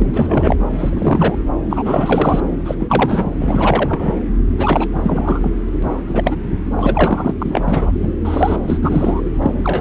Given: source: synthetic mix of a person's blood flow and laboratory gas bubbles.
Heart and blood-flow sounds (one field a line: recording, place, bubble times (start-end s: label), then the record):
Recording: Doppler ultrasound of blood flow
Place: subclavian vein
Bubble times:
0.00-0.56 s: bubbles
0.71-1.37 s: bubbles
1.70-2.40 s: bubbles
2.65-2.75 s: bubbles
2.79-3.30 s: bubbles
3.38-4.15 s: bubbles
4.58-4.88 s: bubbles
4.95-5.51 s: bubbles
5.82-6.02 s: bubbles
6.07-6.37 s: bubbles
6.76-7.34 s: bubbles
7.39-7.64 s: bubbles
7.67-7.92 s: bubbles
8.02-8.12 s: bubbles
8.25-8.57 s: bubbles
8.67-9.21 s: bubbles
9.39-9.54 s: bubbles
9.64-9.81 s: bubbles
From the record:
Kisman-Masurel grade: 343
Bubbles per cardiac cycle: rolling drumbeat, 9 or more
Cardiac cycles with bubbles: 100%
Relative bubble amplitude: loud (0.450 to 0.775)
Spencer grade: 3 (all of the cardiac periods contain showers or single bubble signals, but not dominating or overriding the cardiac motion signals)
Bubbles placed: anywhere in the cardiac cycle